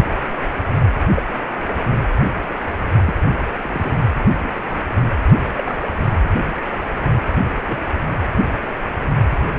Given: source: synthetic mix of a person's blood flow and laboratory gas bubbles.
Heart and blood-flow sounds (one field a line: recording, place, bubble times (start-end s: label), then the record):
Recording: Doppler ultrasound of blood flow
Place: precordium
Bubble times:
1.16-1.23 s: bubbles
3.06-3.14 s: bubbles
3.62-3.94 s: bubbles
4.40-4.50 s: bubbles
4.63-4.80 s: bubbles
5.56-5.82 s: bubbles
7.67-7.77 s: bubbles
From the record:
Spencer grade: 2 (many but less than half of the cardiac periods contain bubble signals, singularly or in groups)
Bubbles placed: anywhere in the cardiac cycle